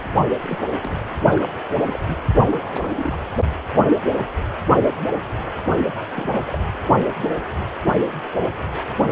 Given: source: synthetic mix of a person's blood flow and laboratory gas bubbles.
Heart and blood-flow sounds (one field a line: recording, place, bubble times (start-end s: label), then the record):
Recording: Doppler ultrasound of blood flow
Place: precordium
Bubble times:
0.41-0.59 s: bubbles
0.83-1.04 s: bubbles
1.35-1.48 s: bubbles
1.81-2.23 s: bubbles
2.50-3.18 s: bubbles
6.16-6.41 s: bubbles
6.46-6.58 s: bubbles
From the record:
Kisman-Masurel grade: 221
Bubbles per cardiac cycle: several, 3 to 8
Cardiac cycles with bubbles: 10 to 50%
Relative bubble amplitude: barely perceptible (0.100 to 0.250)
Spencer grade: 2 (many but less than half of the cardiac periods contain bubble signals, singularly or in groups)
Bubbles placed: only in the low amplitude regions of the cardiac cycle